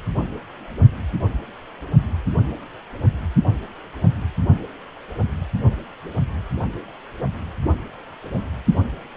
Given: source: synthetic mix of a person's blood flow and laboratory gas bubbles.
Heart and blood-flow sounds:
Doppler ultrasound of blood flow; precordium
no bubbles
From the record:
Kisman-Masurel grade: 000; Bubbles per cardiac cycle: 0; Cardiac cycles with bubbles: 0%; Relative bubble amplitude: no bubbles discernible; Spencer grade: 0 (complete lack of bubble signals)

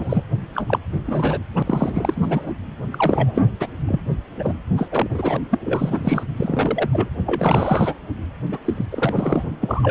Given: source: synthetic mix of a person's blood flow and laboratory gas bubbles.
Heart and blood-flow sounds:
Doppler ultrasound of blood flow; precordium
0.00-0.23 s: bubbles
0.55-0.79 s: bubbles
1.06-1.38 s: bubbles
1.54-1.62 s: bubbles
1.66-2.52 s: bubbles
2.90-3.50 s: bubbles
3.60-3.67 s: bubbles
3.88-4.01 s: bubbles
4.39-4.54 s: bubbles
4.76-4.87 s: bubbles
4.91-5.37 s: bubbles
5.51-5.60 s: bubbles
5.64-6.24 s: bubbles
6.37-6.90 s: bubbles
6.92-7.10 s: bubbles
7.26-7.94 s: bubbles
8.51-8.58 s: bubbles
8.64-8.74 s: bubbles
8.77-8.85 s: bubbles
8.91-9.43 s: bubbles
9.61-9.91 s: bubbles
From the record:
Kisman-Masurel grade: 342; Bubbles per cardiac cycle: rolling drumbeat, 9 or more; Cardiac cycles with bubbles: 100%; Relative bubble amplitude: moderate (0.250 to 0.450); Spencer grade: 3 (all of the cardiac periods contain showers or single bubble signals, but not dominating or overriding the cardiac motion signals); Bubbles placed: anywhere in the cardiac cycle

